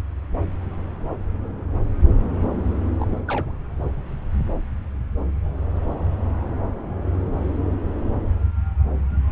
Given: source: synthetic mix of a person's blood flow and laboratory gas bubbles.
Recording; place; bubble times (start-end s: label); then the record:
Doppler ultrasound of blood flow; subclavian vein
2.99-3.21 s: bubbles
3.27-3.52 s: bubbles
From the record:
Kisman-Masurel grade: 211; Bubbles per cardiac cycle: several, 3 to 8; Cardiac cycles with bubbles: 1 to 10%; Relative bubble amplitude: barely perceptible (0.100 to 0.250); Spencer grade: 1 (occasional bubble signal discernible with the cardiac motion signal, with majority of cardiac periods free of bubbles); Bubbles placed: anywhere in the cardiac cycle